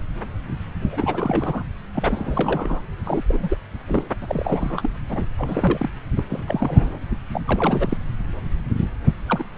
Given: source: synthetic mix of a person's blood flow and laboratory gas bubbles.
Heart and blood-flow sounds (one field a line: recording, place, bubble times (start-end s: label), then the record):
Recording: Doppler ultrasound of blood flow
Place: subclavian vein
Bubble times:
0.90-1.64 s: bubbles
1.95-2.81 s: bubbles
3.03-3.25 s: bubbles
3.28-3.58 s: bubbles
3.86-4.08 s: bubbles
4.22-4.89 s: bubbles
5.10-5.27 s: bubbles
5.39-5.90 s: bubbles
6.17-6.23 s: bubbles
6.29-7.00 s: bubbles
7.33-7.41 s: bubbles
7.47-7.97 s: bubbles
9.26-9.44 s: bubbles
From the record:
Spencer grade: 3 (all of the cardiac periods contain showers or single bubble signals, but not dominating or overriding the cardiac motion signals)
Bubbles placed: anywhere in the cardiac cycle